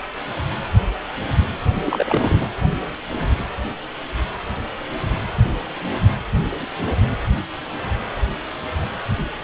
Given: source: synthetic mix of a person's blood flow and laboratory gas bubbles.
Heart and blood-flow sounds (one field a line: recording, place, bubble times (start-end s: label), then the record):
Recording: Doppler ultrasound of blood flow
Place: precordium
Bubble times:
1.85-2.46 s: bubbles
From the record:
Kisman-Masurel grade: 212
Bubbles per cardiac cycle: several, 3 to 8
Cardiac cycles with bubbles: 1 to 10%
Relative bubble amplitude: moderate (0.250 to 0.450)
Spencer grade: 1 (occasional bubble signal discernible with the cardiac motion signal, with majority of cardiac periods free of bubbles)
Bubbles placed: anywhere in the cardiac cycle